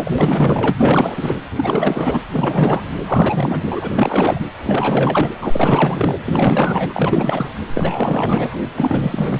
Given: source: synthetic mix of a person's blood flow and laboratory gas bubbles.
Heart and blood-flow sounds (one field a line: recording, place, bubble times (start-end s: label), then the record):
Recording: Doppler ultrasound of blood flow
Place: precordium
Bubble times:
0.00-0.10 s: bubbles
0.18-1.34 s: bubbles
1.55-2.19 s: bubbles
2.33-2.83 s: bubbles
3.06-3.91 s: bubbles
3.94-4.47 s: bubbles
4.58-5.35 s: bubbles
5.42-6.16 s: bubbles
6.23-7.49 s: bubbles
7.74-8.62 s: bubbles
8.75-9.40 s: bubbles
From the record:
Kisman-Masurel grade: 444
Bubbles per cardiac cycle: continuous sound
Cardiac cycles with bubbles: 100%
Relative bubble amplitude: maximal (0.775 to 0.999)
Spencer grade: 4 (maximum detectable bubble signal sounding continuously throughout systole and diastole of every cardiac period, and overriding the amplitude of the normal cardiac signals)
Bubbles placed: anywhere in the cardiac cycle